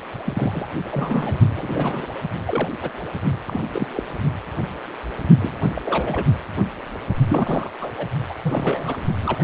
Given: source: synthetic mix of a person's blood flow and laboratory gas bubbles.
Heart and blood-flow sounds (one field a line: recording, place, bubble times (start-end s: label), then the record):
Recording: Doppler ultrasound of blood flow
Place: precordium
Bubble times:
0.24-0.68 s: bubbles
0.91-1.40 s: bubbles
1.56-2.07 s: bubbles
2.46-2.69 s: bubbles
2.81-2.91 s: bubbles
3.47-3.60 s: bubbles
3.72-3.88 s: bubbles
3.93-4.03 s: bubbles
5.41-5.82 s: bubbles
5.84-6.25 s: bubbles
7.29-7.70 s: bubbles
7.81-7.90 s: bubbles
7.97-8.07 s: bubbles
8.29-8.34 s: bubbles
8.42-8.96 s: bubbles
9.22-9.44 s: bubbles
From the record:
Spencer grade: 3 (all of the cardiac periods contain showers or single bubble signals, but not dominating or overriding the cardiac motion signals)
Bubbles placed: only in the low amplitude regions of the cardiac cycle